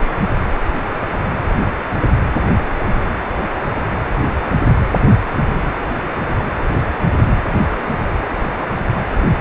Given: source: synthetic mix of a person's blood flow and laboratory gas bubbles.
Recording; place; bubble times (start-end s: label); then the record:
Doppler ultrasound of blood flow; precordium
no bubbles
From the record:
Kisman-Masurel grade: 000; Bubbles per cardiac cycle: 0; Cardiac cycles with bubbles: 0%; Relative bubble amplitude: no bubbles discernible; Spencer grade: 0 (complete lack of bubble signals)